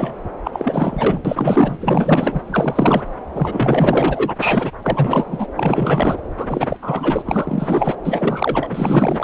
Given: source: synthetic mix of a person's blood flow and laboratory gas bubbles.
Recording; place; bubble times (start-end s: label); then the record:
Doppler ultrasound of blood flow; subclavian vein
0.00-0.13 s: bubbles
0.44-1.21 s: bubbles
1.25-1.78 s: bubbles
1.80-2.42 s: bubbles
2.46-3.03 s: bubbles
3.33-4.35 s: bubbles
4.42-4.71 s: bubbles
4.83-5.47 s: bubbles
5.56-6.17 s: bubbles
6.38-6.76 s: bubbles
6.81-7.22 s: bubbles
7.25-7.95 s: bubbles
8.05-8.68 s: bubbles
8.71-9.24 s: bubbles
From the record:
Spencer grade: 4 (maximum detectable bubble signal sounding continuously throughout systole and diastole of every cardiac period, and overriding the amplitude of the normal cardiac signals); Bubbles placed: anywhere in the cardiac cycle